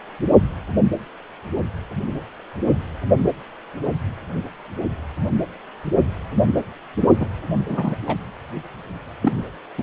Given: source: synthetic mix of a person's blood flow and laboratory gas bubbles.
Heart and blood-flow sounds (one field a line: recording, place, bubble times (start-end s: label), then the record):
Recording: Doppler ultrasound of blood flow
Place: precordium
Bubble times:
7.20-7.29 s: bubbles
7.68-7.96 s: bubbles
8.07-8.17 s: bubbles
9.21-9.32 s: bubbles
9.78-9.83 s: bubbles
From the record:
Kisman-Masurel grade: 222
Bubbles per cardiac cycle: several, 3 to 8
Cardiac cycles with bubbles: 10 to 50%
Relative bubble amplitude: moderate (0.250 to 0.450)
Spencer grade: 2 (many but less than half of the cardiac periods contain bubble signals, singularly or in groups)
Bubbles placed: only in the low amplitude regions of the cardiac cycle